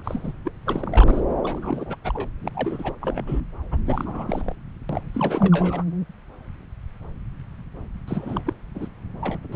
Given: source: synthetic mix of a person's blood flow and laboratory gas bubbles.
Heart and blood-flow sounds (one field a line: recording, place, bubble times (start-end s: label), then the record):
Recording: Doppler ultrasound of blood flow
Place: subclavian vein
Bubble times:
0.00-0.32 s: bubbles
0.44-0.53 s: bubbles
0.66-1.21 s: bubbles
1.43-1.95 s: bubbles
2.04-2.29 s: bubbles
2.42-2.49 s: bubbles
2.54-2.98 s: bubbles
3.01-3.24 s: bubbles
3.26-3.41 s: bubbles
3.71-3.77 s: bubbles
3.85-4.55 s: bubbles
4.89-5.01 s: bubbles
5.13-5.83 s: bubbles
8.07-8.54 s: bubbles
8.74-8.88 s: bubbles
9.21-9.39 s: bubbles
9.42-9.56 s: bubbles
From the record:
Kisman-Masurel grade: 332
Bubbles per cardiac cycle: rolling drumbeat, 9 or more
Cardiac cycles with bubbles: 50 to 99%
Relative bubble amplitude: moderate (0.250 to 0.450)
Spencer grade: 3 (all of the cardiac periods contain showers or single bubble signals, but not dominating or overriding the cardiac motion signals)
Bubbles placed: anywhere in the cardiac cycle